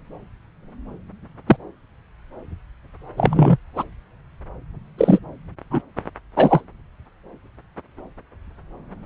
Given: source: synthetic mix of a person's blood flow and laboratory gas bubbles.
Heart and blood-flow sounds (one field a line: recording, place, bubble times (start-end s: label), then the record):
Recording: Doppler ultrasound of blood flow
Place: subclavian vein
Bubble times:
1.48-1.56 s: bubbles
3.17-3.57 s: bubbles
3.75-3.84 s: bubbles
4.97-5.19 s: bubbles
5.70-5.82 s: bubbles
6.36-6.61 s: bubbles
From the record:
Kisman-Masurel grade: 123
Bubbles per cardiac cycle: 1 to 2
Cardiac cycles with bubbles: 10 to 50%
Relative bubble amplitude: loud (0.450 to 0.775)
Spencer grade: 2 (many but less than half of the cardiac periods contain bubble signals, singularly or in groups)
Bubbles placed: anywhere in the cardiac cycle